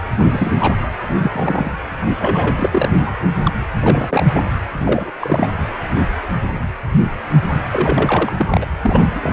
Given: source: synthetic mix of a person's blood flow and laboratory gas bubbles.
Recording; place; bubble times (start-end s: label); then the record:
Doppler ultrasound of blood flow; precordium
0.18-0.52 s: bubbles
0.58-0.77 s: bubbles
1.20-1.72 s: bubbles
2.07-2.16 s: bubbles
2.20-3.12 s: bubbles
3.45-3.53 s: bubbles
3.82-4.28 s: bubbles
4.34-4.42 s: bubbles
4.79-5.10 s: bubbles
5.21-5.47 s: bubbles
7.72-8.32 s: bubbles
8.37-8.66 s: bubbles
8.81-9.08 s: bubbles
9.15-9.33 s: bubbles
From the record:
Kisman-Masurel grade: 232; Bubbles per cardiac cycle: several, 3 to 8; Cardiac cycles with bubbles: 50 to 99%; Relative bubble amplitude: moderate (0.250 to 0.450); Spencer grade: 3 (all of the cardiac periods contain showers or single bubble signals, but not dominating or overriding the cardiac motion signals); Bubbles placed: anywhere in the cardiac cycle